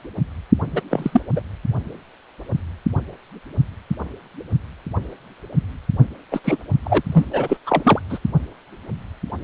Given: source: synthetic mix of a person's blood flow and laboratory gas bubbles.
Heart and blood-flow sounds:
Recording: Doppler ultrasound of blood flow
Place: precordium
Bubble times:
0.72-0.81 s: bubbles
0.91-1.21 s: bubbles
1.35-1.42 s: bubbles
6.31-6.40 s: bubbles
6.44-6.58 s: bubbles
6.84-7.02 s: bubbles
7.12-7.25 s: bubbles
7.33-7.57 s: bubbles
7.67-8.00 s: bubbles
8.09-8.18 s: bubbles
From the record:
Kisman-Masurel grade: 223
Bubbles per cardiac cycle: several, 3 to 8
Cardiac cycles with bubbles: 10 to 50%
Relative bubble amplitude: loud (0.450 to 0.775)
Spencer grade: 2 (many but less than half of the cardiac periods contain bubble signals, singularly or in groups)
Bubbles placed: only in the low amplitude regions of the cardiac cycle

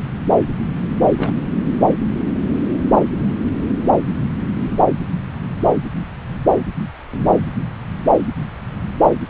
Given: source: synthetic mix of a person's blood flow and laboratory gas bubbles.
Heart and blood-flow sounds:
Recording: Doppler ultrasound of blood flow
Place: subclavian vein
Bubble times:
1.17-1.33 s: bubbles
From the record:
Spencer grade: 1 (occasional bubble signal discernible with the cardiac motion signal, with majority of cardiac periods free of bubbles)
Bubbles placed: anywhere in the cardiac cycle

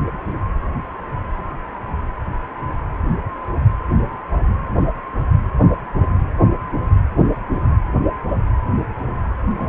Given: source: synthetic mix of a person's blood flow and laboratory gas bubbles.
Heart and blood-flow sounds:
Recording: Doppler ultrasound of blood flow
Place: precordium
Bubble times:
9.58-9.69 s: bubbles
From the record:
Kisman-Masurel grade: 113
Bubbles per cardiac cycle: 1 to 2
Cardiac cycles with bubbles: 1 to 10%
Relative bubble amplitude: loud (0.450 to 0.775)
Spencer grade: 1 (occasional bubble signal discernible with the cardiac motion signal, with majority of cardiac periods free of bubbles)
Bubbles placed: anywhere in the cardiac cycle

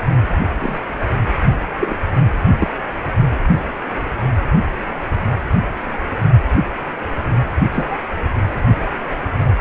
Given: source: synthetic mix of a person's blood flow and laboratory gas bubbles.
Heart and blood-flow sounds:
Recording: Doppler ultrasound of blood flow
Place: precordium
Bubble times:
0.58-0.77 s: bubbles
1.80-1.97 s: bubbles
2.58-2.69 s: bubbles
7.71-8.11 s: bubbles
From the record:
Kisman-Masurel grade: 122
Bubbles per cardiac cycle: 1 to 2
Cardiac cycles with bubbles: 10 to 50%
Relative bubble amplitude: moderate (0.250 to 0.450)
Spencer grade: 2 (many but less than half of the cardiac periods contain bubble signals, singularly or in groups)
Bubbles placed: only in the low amplitude regions of the cardiac cycle

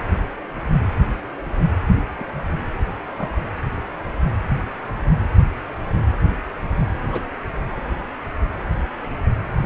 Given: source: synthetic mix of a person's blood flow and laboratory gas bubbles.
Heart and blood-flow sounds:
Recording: Doppler ultrasound of blood flow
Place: precordium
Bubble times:
1.94-2.04 s: bubbles
2.19-2.24 s: bubbles
3.19-3.32 s: bubbles
7.03-7.08 s: bubbles
7.12-7.24 s: bubbles
From the record:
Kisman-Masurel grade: 121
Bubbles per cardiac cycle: 1 to 2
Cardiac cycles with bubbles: 10 to 50%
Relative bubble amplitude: barely perceptible (0.100 to 0.250)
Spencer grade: 2 (many but less than half of the cardiac periods contain bubble signals, singularly or in groups)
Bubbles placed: anywhere in the cardiac cycle

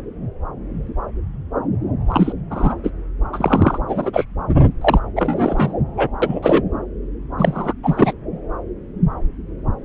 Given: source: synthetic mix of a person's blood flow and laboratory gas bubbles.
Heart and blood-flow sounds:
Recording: Doppler ultrasound of blood flow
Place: subclavian vein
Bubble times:
2.08-2.32 s: bubbles
2.50-2.75 s: bubbles
2.83-2.90 s: bubbles
3.32-3.78 s: bubbles
3.88-4.25 s: bubbles
4.81-5.00 s: bubbles
5.16-5.74 s: bubbles
5.97-6.08 s: bubbles
6.22-6.40 s: bubbles
6.43-6.62 s: bubbles
7.38-7.74 s: bubbles
7.83-8.13 s: bubbles
From the record:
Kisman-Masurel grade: 233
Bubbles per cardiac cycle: several, 3 to 8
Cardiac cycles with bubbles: 50 to 99%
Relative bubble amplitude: loud (0.450 to 0.775)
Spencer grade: 3 (all of the cardiac periods contain showers or single bubble signals, but not dominating or overriding the cardiac motion signals)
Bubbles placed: anywhere in the cardiac cycle

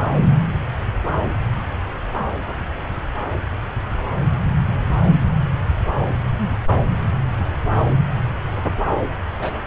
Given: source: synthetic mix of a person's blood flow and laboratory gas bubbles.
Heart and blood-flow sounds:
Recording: Doppler ultrasound of blood flow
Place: subclavian vein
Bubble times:
9.38-9.59 s: bubbles
From the record:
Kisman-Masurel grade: 112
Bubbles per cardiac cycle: 1 to 2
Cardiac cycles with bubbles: 1 to 10%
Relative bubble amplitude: moderate (0.250 to 0.450)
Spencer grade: 1 (occasional bubble signal discernible with the cardiac motion signal, with majority of cardiac periods free of bubbles)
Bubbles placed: anywhere in the cardiac cycle

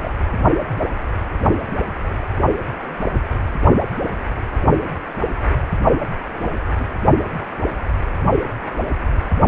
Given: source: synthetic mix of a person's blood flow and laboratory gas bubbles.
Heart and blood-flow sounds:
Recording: Doppler ultrasound of blood flow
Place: precordium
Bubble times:
0.01-0.11 s: bubbles
2.06-2.17 s: bubbles
6.35-6.48 s: bubbles
6.75-6.87 s: bubbles
From the record:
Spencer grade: 2 (many but less than half of the cardiac periods contain bubble signals, singularly or in groups)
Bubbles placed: only in the low amplitude regions of the cardiac cycle

